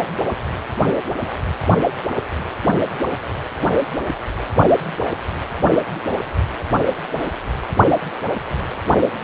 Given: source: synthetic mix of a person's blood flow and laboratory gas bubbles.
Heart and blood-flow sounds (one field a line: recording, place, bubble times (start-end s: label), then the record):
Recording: Doppler ultrasound of blood flow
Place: precordium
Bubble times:
0.89-0.94 s: bubbles
From the record:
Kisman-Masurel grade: 112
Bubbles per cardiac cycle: 1 to 2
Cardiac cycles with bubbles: 1 to 10%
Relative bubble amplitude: moderate (0.250 to 0.450)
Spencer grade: 1 (occasional bubble signal discernible with the cardiac motion signal, with majority of cardiac periods free of bubbles)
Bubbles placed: only in the low amplitude regions of the cardiac cycle